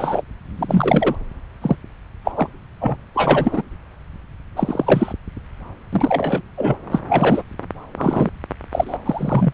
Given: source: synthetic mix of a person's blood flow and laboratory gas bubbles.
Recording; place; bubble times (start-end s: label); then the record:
Doppler ultrasound of blood flow; subclavian vein
0.00-0.22 s: bubbles
0.57-1.15 s: bubbles
1.61-1.76 s: bubbles
2.24-2.31 s: bubbles
2.35-2.48 s: bubbles
2.80-2.96 s: bubbles
3.15-3.62 s: bubbles
4.56-5.13 s: bubbles
5.92-6.42 s: bubbles
6.58-6.76 s: bubbles
6.91-7.00 s: bubbles
7.08-7.42 s: bubbles
7.97-8.30 s: bubbles
8.71-8.97 s: bubbles
9.04-9.52 s: bubbles
From the record:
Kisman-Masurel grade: 243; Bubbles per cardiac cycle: several, 3 to 8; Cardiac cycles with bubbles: 100%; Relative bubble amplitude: loud (0.450 to 0.775); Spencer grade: 3 (all of the cardiac periods contain showers or single bubble signals, but not dominating or overriding the cardiac motion signals); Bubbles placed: anywhere in the cardiac cycle